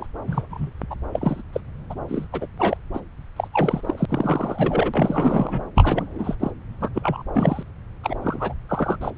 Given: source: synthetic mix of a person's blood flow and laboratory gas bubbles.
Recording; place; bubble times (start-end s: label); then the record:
Doppler ultrasound of blood flow; subclavian vein
0.00-0.07 s: bubbles
0.27-0.46 s: bubbles
0.49-0.70 s: bubbles
0.90-0.96 s: bubbles
1.12-1.42 s: bubbles
1.52-1.60 s: bubbles
1.90-1.95 s: bubbles
2.08-2.27 s: bubbles
2.32-2.47 s: bubbles
2.58-2.77 s: bubbles
2.93-3.01 s: bubbles
3.36-3.48 s: bubbles
3.53-4.05 s: bubbles
4.08-5.65 s: bubbles
5.75-6.35 s: bubbles
6.39-6.51 s: bubbles
6.80-6.89 s: bubbles
6.95-7.22 s: bubbles
7.32-7.63 s: bubbles
8.03-8.16 s: bubbles
8.22-8.54 s: bubbles
8.69-8.96 s: bubbles
9.01-9.11 s: bubbles
From the record:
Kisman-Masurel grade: 342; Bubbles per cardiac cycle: rolling drumbeat, 9 or more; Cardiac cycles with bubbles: 100%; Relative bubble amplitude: moderate (0.250 to 0.450); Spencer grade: 3 (all of the cardiac periods contain showers or single bubble signals, but not dominating or overriding the cardiac motion signals); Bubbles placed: anywhere in the cardiac cycle